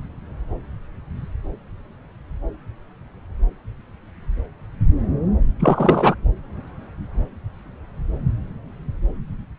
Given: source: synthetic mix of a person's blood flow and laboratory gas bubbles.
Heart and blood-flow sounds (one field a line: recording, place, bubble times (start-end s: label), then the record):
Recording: Doppler ultrasound of blood flow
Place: subclavian vein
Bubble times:
5.59-6.15 s: bubbles
From the record:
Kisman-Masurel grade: 213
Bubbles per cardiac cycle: several, 3 to 8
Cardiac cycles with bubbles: 1 to 10%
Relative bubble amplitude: loud (0.450 to 0.775)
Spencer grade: 1 (occasional bubble signal discernible with the cardiac motion signal, with majority of cardiac periods free of bubbles)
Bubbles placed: anywhere in the cardiac cycle